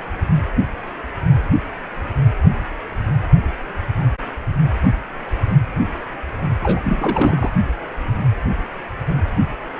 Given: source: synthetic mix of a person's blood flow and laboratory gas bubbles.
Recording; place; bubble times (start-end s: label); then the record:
Doppler ultrasound of blood flow; precordium
6.63-6.82 s: bubbles
6.85-7.53 s: bubbles
From the record:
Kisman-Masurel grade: 222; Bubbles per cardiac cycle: several, 3 to 8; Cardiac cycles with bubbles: 10 to 50%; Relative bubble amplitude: moderate (0.250 to 0.450); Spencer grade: 2 (many but less than half of the cardiac periods contain bubble signals, singularly or in groups); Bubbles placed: only in the low amplitude regions of the cardiac cycle